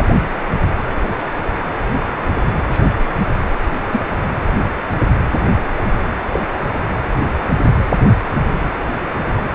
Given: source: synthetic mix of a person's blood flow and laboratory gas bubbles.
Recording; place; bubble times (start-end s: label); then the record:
Doppler ultrasound of blood flow; precordium
0.00-0.08 s: bubbles
2.69-2.85 s: bubbles
3.91-4.02 s: bubbles
6.32-6.40 s: bubbles
From the record:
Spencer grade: 2 (many but less than half of the cardiac periods contain bubble signals, singularly or in groups); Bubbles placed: anywhere in the cardiac cycle